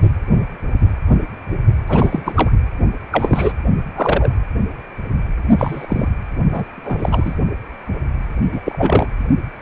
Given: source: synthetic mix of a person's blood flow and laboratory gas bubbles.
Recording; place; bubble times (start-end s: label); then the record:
Doppler ultrasound of blood flow; precordium
1.88-2.51 s: bubbles
3.12-3.52 s: bubbles
3.96-4.32 s: bubbles
5.58-6.08 s: bubbles
6.53-6.65 s: bubbles
6.77-7.35 s: bubbles
8.52-8.62 s: bubbles
8.65-9.06 s: bubbles
From the record:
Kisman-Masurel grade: 232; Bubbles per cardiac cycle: several, 3 to 8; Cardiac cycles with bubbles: 50 to 99%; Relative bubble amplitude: moderate (0.250 to 0.450); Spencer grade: 3 (all of the cardiac periods contain showers or single bubble signals, but not dominating or overriding the cardiac motion signals); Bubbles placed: only in the low amplitude regions of the cardiac cycle